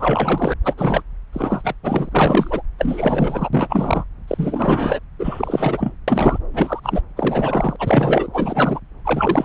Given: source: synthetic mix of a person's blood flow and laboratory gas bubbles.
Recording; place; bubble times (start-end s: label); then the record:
Doppler ultrasound of blood flow; subclavian vein
0.00-0.53 s: bubbles
0.65-0.74 s: bubbles
0.77-1.02 s: bubbles
1.32-1.74 s: bubbles
1.83-2.62 s: bubbles
2.79-3.49 s: bubbles
3.53-4.04 s: bubbles
4.28-5.00 s: bubbles
5.19-5.95 s: bubbles
6.08-6.39 s: bubbles
6.53-6.80 s: bubbles
6.83-7.02 s: bubbles
7.16-7.76 s: bubbles
7.79-8.28 s: bubbles
8.33-8.80 s: bubbles
9.05-9.45 s: bubbles
From the record:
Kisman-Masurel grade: 343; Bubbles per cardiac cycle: rolling drumbeat, 9 or more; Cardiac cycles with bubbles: 100%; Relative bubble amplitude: loud (0.450 to 0.775); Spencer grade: 3 (all of the cardiac periods contain showers or single bubble signals, but not dominating or overriding the cardiac motion signals); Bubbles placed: anywhere in the cardiac cycle